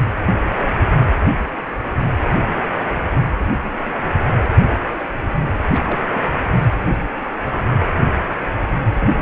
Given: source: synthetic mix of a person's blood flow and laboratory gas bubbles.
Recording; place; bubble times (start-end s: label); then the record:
Doppler ultrasound of blood flow; precordium
5.73-5.81 s: bubbles
5.87-6.41 s: bubbles
9.00-9.12 s: bubbles
From the record:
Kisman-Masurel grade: 221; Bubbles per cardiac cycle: several, 3 to 8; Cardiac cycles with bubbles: 10 to 50%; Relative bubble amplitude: barely perceptible (0.100 to 0.250); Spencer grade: 2 (many but less than half of the cardiac periods contain bubble signals, singularly or in groups); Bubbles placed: anywhere in the cardiac cycle